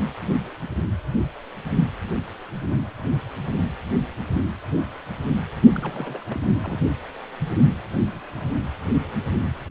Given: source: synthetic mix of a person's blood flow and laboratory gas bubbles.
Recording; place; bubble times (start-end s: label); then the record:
Doppler ultrasound of blood flow; precordium
5.72-6.25 s: bubbles
6.29-6.40 s: bubbles
6.62-6.80 s: bubbles
From the record:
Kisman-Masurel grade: 211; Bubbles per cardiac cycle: several, 3 to 8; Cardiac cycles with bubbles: 1 to 10%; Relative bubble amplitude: barely perceptible (0.100 to 0.250); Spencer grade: 1 (occasional bubble signal discernible with the cardiac motion signal, with majority of cardiac periods free of bubbles); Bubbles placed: anywhere in the cardiac cycle